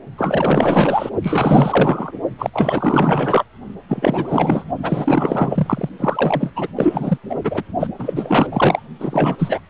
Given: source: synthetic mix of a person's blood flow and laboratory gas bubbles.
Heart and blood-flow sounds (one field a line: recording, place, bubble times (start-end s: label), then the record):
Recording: Doppler ultrasound of blood flow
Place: precordium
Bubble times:
0.17-1.10 s: bubbles
1.22-2.12 s: bubbles
2.38-2.50 s: bubbles
2.53-3.44 s: bubbles
3.88-4.64 s: bubbles
4.82-5.89 s: bubbles
5.99-6.51 s: bubbles
6.55-6.68 s: bubbles
6.75-7.18 s: bubbles
7.29-7.35 s: bubbles
7.44-7.63 s: bubbles
7.79-7.88 s: bubbles
7.99-8.47 s: bubbles
8.52-8.84 s: bubbles
9.00-9.36 s: bubbles
9.38-9.60 s: bubbles
From the record:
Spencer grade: 4 (maximum detectable bubble signal sounding continuously throughout systole and diastole of every cardiac period, and overriding the amplitude of the normal cardiac signals)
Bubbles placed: only in the low amplitude regions of the cardiac cycle